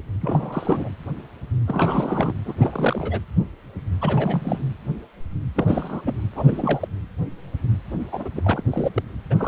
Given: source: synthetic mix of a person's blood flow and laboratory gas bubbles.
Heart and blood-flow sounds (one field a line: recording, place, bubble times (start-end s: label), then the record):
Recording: Doppler ultrasound of blood flow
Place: precordium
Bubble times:
0.21-0.89 s: bubbles
1.68-2.33 s: bubbles
2.45-2.54 s: bubbles
2.60-3.20 s: bubbles
4.01-4.59 s: bubbles
5.55-6.01 s: bubbles
6.05-6.14 s: bubbles
6.35-6.88 s: bubbles
8.12-8.29 s: bubbles
8.36-8.62 s: bubbles
8.71-8.90 s: bubbles
8.94-9.02 s: bubbles
9.30-9.35 s: bubbles
9.38-9.48 s: bubbles
From the record:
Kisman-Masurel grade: 332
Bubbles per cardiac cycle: rolling drumbeat, 9 or more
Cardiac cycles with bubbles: 50 to 99%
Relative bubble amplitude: moderate (0.250 to 0.450)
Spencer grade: 3 (all of the cardiac periods contain showers or single bubble signals, but not dominating or overriding the cardiac motion signals)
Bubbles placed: anywhere in the cardiac cycle